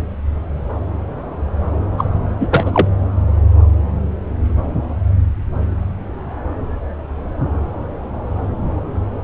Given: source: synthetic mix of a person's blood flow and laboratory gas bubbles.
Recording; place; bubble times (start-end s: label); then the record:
Doppler ultrasound of blood flow; subclavian vein
1.97-2.04 s: bubbles
2.40-2.87 s: bubbles
From the record:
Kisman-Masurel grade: 223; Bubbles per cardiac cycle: several, 3 to 8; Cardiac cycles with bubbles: 10 to 50%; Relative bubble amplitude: loud (0.450 to 0.775); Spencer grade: 2 (many but less than half of the cardiac periods contain bubble signals, singularly or in groups); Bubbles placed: anywhere in the cardiac cycle